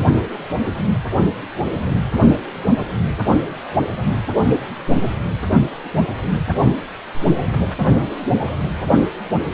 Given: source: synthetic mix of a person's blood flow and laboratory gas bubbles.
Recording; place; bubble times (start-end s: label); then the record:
Doppler ultrasound of blood flow; precordium
no bubbles
From the record:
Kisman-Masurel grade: 000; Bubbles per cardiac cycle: 0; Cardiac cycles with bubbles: 0%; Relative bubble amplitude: no bubbles discernible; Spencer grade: 0 (complete lack of bubble signals)